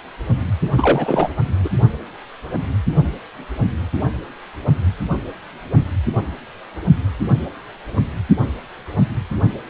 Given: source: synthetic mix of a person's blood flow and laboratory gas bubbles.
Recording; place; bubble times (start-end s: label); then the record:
Doppler ultrasound of blood flow; precordium
0.75-1.31 s: bubbles
1.64-1.70 s: bubbles
From the record:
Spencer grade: 1 (occasional bubble signal discernible with the cardiac motion signal, with majority of cardiac periods free of bubbles); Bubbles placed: only in the low amplitude regions of the cardiac cycle